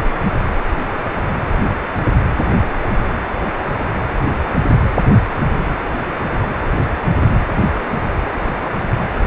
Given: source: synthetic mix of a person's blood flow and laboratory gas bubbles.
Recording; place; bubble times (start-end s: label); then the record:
Doppler ultrasound of blood flow; precordium
no bubbles
From the record:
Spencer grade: 0 (complete lack of bubble signals)